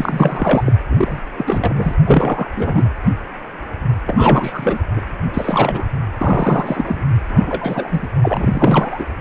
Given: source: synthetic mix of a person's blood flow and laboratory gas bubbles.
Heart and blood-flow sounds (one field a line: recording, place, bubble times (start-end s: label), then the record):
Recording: Doppler ultrasound of blood flow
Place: precordium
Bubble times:
0.00-0.73 s: bubbles
0.90-1.20 s: bubbles
1.38-1.94 s: bubbles
2.06-2.48 s: bubbles
2.56-2.89 s: bubbles
4.06-4.83 s: bubbles
4.96-5.02 s: bubbles
5.34-5.87 s: bubbles
6.18-7.04 s: bubbles
7.30-8.07 s: bubbles
8.22-9.06 s: bubbles
From the record:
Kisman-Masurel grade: 333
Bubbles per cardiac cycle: rolling drumbeat, 9 or more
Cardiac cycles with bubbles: 50 to 99%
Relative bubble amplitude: loud (0.450 to 0.775)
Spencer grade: 3 (all of the cardiac periods contain showers or single bubble signals, but not dominating or overriding the cardiac motion signals)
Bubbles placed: anywhere in the cardiac cycle